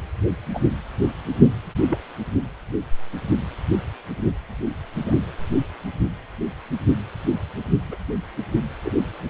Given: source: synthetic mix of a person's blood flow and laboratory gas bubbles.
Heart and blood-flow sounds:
Doppler ultrasound of blood flow; precordium
0.53-0.60 s: bubbles
1.88-1.98 s: bubbles
5.04-5.17 s: bubbles
7.88-7.97 s: bubbles
8.85-8.90 s: bubbles
From the record:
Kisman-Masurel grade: 121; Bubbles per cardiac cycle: 1 to 2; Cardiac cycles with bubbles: 10 to 50%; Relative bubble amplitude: barely perceptible (0.100 to 0.250); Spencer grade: 2 (many but less than half of the cardiac periods contain bubble signals, singularly or in groups); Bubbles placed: anywhere in the cardiac cycle

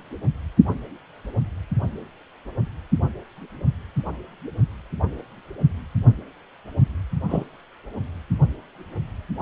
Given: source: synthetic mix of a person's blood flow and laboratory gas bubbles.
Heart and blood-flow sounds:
Doppler ultrasound of blood flow; precordium
7.28-7.44 s: bubbles
From the record:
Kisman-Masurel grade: 112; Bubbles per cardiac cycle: 1 to 2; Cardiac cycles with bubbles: 1 to 10%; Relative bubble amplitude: moderate (0.250 to 0.450); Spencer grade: 1 (occasional bubble signal discernible with the cardiac motion signal, with majority of cardiac periods free of bubbles); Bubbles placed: only in the low amplitude regions of the cardiac cycle

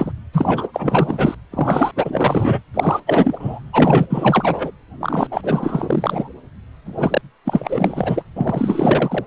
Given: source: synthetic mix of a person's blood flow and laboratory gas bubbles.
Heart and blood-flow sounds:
Doppler ultrasound of blood flow; precordium
0.00-0.12 s: bubbles
0.33-0.67 s: bubbles
0.73-1.35 s: bubbles
1.51-1.91 s: bubbles
1.95-2.62 s: bubbles
2.74-3.01 s: bubbles
3.06-3.60 s: bubbles
3.73-4.06 s: bubbles
4.09-4.71 s: bubbles
5.00-5.27 s: bubbles
5.31-6.29 s: bubbles
6.86-7.21 s: bubbles
7.45-8.25 s: bubbles
8.36-9.25 s: bubbles
From the record:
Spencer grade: 4 (maximum detectable bubble signal sounding continuously throughout systole and diastole of every cardiac period, and overriding the amplitude of the normal cardiac signals); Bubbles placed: anywhere in the cardiac cycle

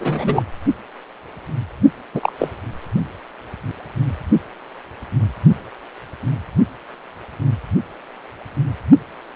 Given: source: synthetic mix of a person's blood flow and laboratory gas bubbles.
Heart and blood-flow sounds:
Doppler ultrasound of blood flow; precordium
0.00-0.43 s: bubbles
2.14-2.32 s: bubbles
2.39-2.50 s: bubbles
From the record:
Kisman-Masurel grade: 223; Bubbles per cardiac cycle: several, 3 to 8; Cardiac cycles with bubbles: 10 to 50%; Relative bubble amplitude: loud (0.450 to 0.775); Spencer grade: 2 (many but less than half of the cardiac periods contain bubble signals, singularly or in groups); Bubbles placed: only in the low amplitude regions of the cardiac cycle

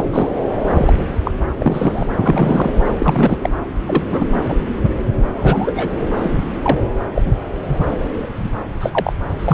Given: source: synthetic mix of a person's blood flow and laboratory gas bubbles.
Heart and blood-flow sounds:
Doppler ultrasound of blood flow; subclavian vein
0.00-0.08 s: bubbles
0.12-0.29 s: bubbles
0.69-0.93 s: bubbles
1.24-1.31 s: bubbles
1.59-2.08 s: bubbles
2.21-2.71 s: bubbles
2.99-3.38 s: bubbles
3.42-3.50 s: bubbles
3.87-4.03 s: bubbles
4.11-4.26 s: bubbles
4.44-4.57 s: bubbles
4.84-4.89 s: bubbles
5.36-5.73 s: bubbles
5.76-5.88 s: bubbles
6.16-6.32 s: bubbles
6.62-6.78 s: bubbles
7.14-7.22 s: bubbles
7.26-7.32 s: bubbles
7.68-7.79 s: bubbles
8.80-9.13 s: bubbles
9.38-9.54 s: bubbles
From the record:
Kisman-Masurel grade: 233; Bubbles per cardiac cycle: several, 3 to 8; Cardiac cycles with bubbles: 50 to 99%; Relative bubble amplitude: loud (0.450 to 0.775); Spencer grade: 3 (all of the cardiac periods contain showers or single bubble signals, but not dominating or overriding the cardiac motion signals); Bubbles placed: anywhere in the cardiac cycle

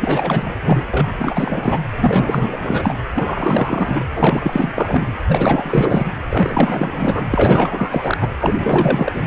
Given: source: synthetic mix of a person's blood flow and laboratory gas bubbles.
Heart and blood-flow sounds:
Doppler ultrasound of blood flow; precordium
0.00-0.55 s: bubbles
0.62-0.87 s: bubbles
0.91-1.81 s: bubbles
2.00-2.96 s: bubbles
3.15-4.04 s: bubbles
4.15-4.73 s: bubbles
4.75-5.17 s: bubbles
5.28-6.22 s: bubbles
6.29-7.25 s: bubbles
7.31-8.18 s: bubbles
8.21-8.29 s: bubbles
8.39-9.23 s: bubbles
From the record:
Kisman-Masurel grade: 444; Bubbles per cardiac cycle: continuous sound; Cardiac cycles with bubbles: 100%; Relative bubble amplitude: maximal (0.775 to 0.999); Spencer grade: 4 (maximum detectable bubble signal sounding continuously throughout systole and diastole of every cardiac period, and overriding the amplitude of the normal cardiac signals); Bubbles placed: anywhere in the cardiac cycle

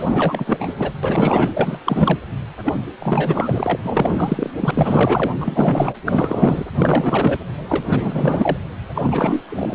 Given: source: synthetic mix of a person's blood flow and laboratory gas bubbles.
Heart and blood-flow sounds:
Doppler ultrasound of blood flow; precordium
0.00-0.74 s: bubbles
0.78-0.92 s: bubbles
1.03-1.79 s: bubbles
1.85-2.19 s: bubbles
2.65-2.75 s: bubbles
2.99-3.77 s: bubbles
3.83-4.51 s: bubbles
4.56-4.71 s: bubbles
4.74-5.32 s: bubbles
5.40-5.95 s: bubbles
6.05-6.65 s: bubbles
6.76-7.40 s: bubbles
7.69-8.57 s: bubbles
8.94-9.43 s: bubbles
9.49-9.75 s: bubbles
From the record:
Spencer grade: 4 (maximum detectable bubble signal sounding continuously throughout systole and diastole of every cardiac period, and overriding the amplitude of the normal cardiac signals); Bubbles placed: anywhere in the cardiac cycle

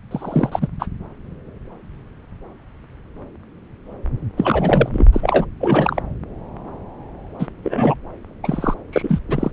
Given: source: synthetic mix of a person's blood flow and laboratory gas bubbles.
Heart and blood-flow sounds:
Doppler ultrasound of blood flow; subclavian vein
0.11-0.68 s: bubbles
0.79-0.87 s: bubbles
4.37-5.07 s: bubbles
5.12-5.46 s: bubbles
5.61-6.02 s: bubbles
7.39-7.48 s: bubbles
7.63-7.95 s: bubbles
8.43-8.74 s: bubbles
8.92-9.19 s: bubbles
9.27-9.51 s: bubbles
From the record:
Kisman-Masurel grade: 233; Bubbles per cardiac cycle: several, 3 to 8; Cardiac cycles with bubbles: 50 to 99%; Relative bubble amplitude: loud (0.450 to 0.775); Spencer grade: 3 (all of the cardiac periods contain showers or single bubble signals, but not dominating or overriding the cardiac motion signals); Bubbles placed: anywhere in the cardiac cycle

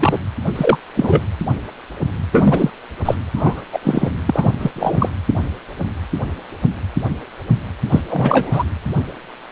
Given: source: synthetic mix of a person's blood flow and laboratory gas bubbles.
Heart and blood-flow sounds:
Doppler ultrasound of blood flow; precordium
0.00-0.18 s: bubbles
0.55-0.80 s: bubbles
0.95-1.23 s: bubbles
2.31-2.70 s: bubbles
3.05-3.15 s: bubbles
3.35-3.62 s: bubbles
3.72-3.79 s: bubbles
3.82-4.10 s: bubbles
4.26-4.50 s: bubbles
4.58-4.71 s: bubbles
4.76-5.09 s: bubbles
7.89-8.00 s: bubbles
8.09-8.63 s: bubbles
From the record:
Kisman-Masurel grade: 223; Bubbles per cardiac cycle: several, 3 to 8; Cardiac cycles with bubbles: 10 to 50%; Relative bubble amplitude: loud (0.450 to 0.775); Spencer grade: 2 (many but less than half of the cardiac periods contain bubble signals, singularly or in groups); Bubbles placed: anywhere in the cardiac cycle

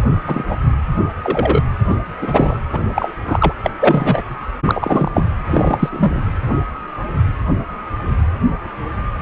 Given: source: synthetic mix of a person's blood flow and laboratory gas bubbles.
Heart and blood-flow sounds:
Doppler ultrasound of blood flow; precordium
0.27-0.44 s: bubbles
0.48-0.58 s: bubbles
1.23-1.62 s: bubbles
1.90-1.96 s: bubbles
2.21-2.57 s: bubbles
2.72-2.79 s: bubbles
2.94-3.15 s: bubbles
3.25-3.52 s: bubbles
3.63-3.71 s: bubbles
3.80-4.23 s: bubbles
4.65-5.12 s: bubbles
5.14-5.25 s: bubbles
5.51-5.90 s: bubbles
5.92-6.23 s: bubbles
From the record:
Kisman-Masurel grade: 233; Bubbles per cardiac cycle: several, 3 to 8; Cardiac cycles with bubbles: 50 to 99%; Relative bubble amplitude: loud (0.450 to 0.775); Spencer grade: 3 (all of the cardiac periods contain showers or single bubble signals, but not dominating or overriding the cardiac motion signals); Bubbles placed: anywhere in the cardiac cycle

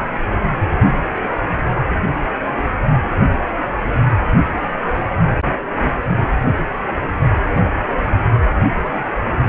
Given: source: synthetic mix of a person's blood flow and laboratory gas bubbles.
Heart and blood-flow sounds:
Doppler ultrasound of blood flow; precordium
no bubbles
From the record:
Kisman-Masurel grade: 000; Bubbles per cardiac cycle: 0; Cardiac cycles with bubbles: 0%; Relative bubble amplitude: no bubbles discernible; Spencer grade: 0 (complete lack of bubble signals)

